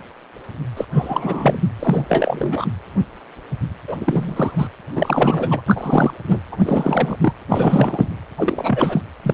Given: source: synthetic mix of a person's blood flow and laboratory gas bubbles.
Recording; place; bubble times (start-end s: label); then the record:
Doppler ultrasound of blood flow; precordium
0.76-0.85 s: bubbles
0.93-1.63 s: bubbles
1.79-2.67 s: bubbles
3.87-3.97 s: bubbles
4.00-4.69 s: bubbles
4.94-5.62 s: bubbles
5.67-6.14 s: bubbles
6.27-6.39 s: bubbles
6.51-6.58 s: bubbles
6.64-7.17 s: bubbles
7.21-7.33 s: bubbles
7.49-8.08 s: bubbles
8.37-9.01 s: bubbles
9.23-9.34 s: bubbles
From the record:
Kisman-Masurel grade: 333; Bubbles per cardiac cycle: rolling drumbeat, 9 or more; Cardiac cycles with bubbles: 50 to 99%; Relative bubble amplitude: loud (0.450 to 0.775); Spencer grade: 3 (all of the cardiac periods contain showers or single bubble signals, but not dominating or overriding the cardiac motion signals); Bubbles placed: anywhere in the cardiac cycle